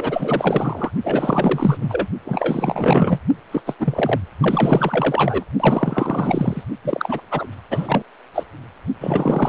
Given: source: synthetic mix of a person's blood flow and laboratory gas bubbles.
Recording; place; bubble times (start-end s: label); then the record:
Doppler ultrasound of blood flow; precordium
0.00-0.91 s: bubbles
1.04-1.77 s: bubbles
1.80-2.08 s: bubbles
2.25-3.19 s: bubbles
3.51-3.62 s: bubbles
3.66-3.74 s: bubbles
3.79-4.20 s: bubbles
4.40-5.44 s: bubbles
5.59-6.63 s: bubbles
6.84-7.21 s: bubbles
7.30-7.46 s: bubbles
7.71-8.04 s: bubbles
8.34-8.44 s: bubbles
9.00-9.48 s: bubbles
From the record:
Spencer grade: 4 (maximum detectable bubble signal sounding continuously throughout systole and diastole of every cardiac period, and overriding the amplitude of the normal cardiac signals); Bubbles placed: only in the low amplitude regions of the cardiac cycle